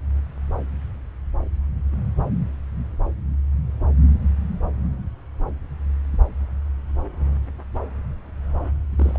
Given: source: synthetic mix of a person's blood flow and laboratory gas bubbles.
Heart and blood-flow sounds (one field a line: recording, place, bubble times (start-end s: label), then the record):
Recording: Doppler ultrasound of blood flow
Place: subclavian vein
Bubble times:
8.92-9.19 s: bubbles
From the record:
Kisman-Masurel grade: 221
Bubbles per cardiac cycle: several, 3 to 8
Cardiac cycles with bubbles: 10 to 50%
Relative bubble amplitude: barely perceptible (0.100 to 0.250)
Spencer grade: 2 (many but less than half of the cardiac periods contain bubble signals, singularly or in groups)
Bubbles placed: anywhere in the cardiac cycle